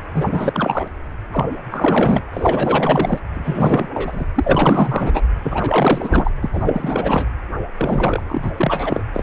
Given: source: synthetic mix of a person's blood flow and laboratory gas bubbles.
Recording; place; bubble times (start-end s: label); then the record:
Doppler ultrasound of blood flow; precordium
0.14-0.88 s: bubbles
1.32-1.45 s: bubbles
1.71-2.23 s: bubbles
2.33-3.19 s: bubbles
3.34-3.88 s: bubbles
3.94-4.25 s: bubbles
4.35-5.23 s: bubbles
5.42-6.31 s: bubbles
6.42-6.50 s: bubbles
6.53-7.27 s: bubbles
7.77-8.51 s: bubbles
8.56-9.04 s: bubbles
9.13-9.23 s: bubbles
From the record:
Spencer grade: 4 (maximum detectable bubble signal sounding continuously throughout systole and diastole of every cardiac period, and overriding the amplitude of the normal cardiac signals); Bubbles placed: anywhere in the cardiac cycle